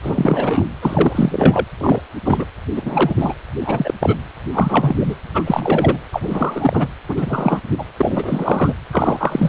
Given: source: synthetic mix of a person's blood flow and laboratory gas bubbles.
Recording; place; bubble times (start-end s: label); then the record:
Doppler ultrasound of blood flow; precordium
0.03-0.66 s: bubbles
0.82-1.66 s: bubbles
1.78-2.00 s: bubbles
2.24-2.46 s: bubbles
2.75-3.14 s: bubbles
3.17-3.34 s: bubbles
3.60-3.94 s: bubbles
4.00-4.16 s: bubbles
4.52-4.96 s: bubbles
5.00-5.16 s: bubbles
5.33-5.43 s: bubbles
5.46-5.98 s: bubbles
6.12-6.88 s: bubbles
7.08-7.61 s: bubbles
7.78-7.84 s: bubbles
7.97-8.73 s: bubbles
8.92-9.48 s: bubbles
From the record:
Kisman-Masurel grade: 343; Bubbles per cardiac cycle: rolling drumbeat, 9 or more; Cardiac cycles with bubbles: 100%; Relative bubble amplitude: loud (0.450 to 0.775); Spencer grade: 3 (all of the cardiac periods contain showers or single bubble signals, but not dominating or overriding the cardiac motion signals); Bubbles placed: anywhere in the cardiac cycle